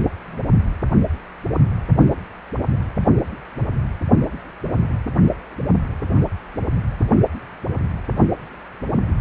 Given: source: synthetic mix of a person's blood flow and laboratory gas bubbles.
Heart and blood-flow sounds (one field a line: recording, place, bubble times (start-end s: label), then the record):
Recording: Doppler ultrasound of blood flow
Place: precordium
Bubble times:
0.28-0.38 s: bubbles
From the record:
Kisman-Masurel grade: 111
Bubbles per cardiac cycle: 1 to 2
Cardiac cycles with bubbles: 1 to 10%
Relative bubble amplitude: barely perceptible (0.100 to 0.250)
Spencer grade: 1 (occasional bubble signal discernible with the cardiac motion signal, with majority of cardiac periods free of bubbles)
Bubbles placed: anywhere in the cardiac cycle